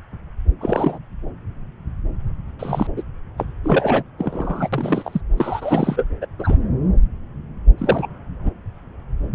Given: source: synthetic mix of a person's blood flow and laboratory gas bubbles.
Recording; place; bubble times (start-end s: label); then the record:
Doppler ultrasound of blood flow; subclavian vein
0.60-0.99 s: bubbles
2.59-2.87 s: bubbles
2.96-3.02 s: bubbles
3.38-3.44 s: bubbles
3.63-4.04 s: bubbles
4.19-4.69 s: bubbles
4.73-5.21 s: bubbles
5.37-6.04 s: bubbles
6.21-6.27 s: bubbles
6.39-6.58 s: bubbles
7.78-8.08 s: bubbles
8.45-8.50 s: bubbles
From the record:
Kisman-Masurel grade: 232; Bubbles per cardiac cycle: several, 3 to 8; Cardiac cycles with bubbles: 50 to 99%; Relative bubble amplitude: moderate (0.250 to 0.450); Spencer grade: 3 (all of the cardiac periods contain showers or single bubble signals, but not dominating or overriding the cardiac motion signals); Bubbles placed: anywhere in the cardiac cycle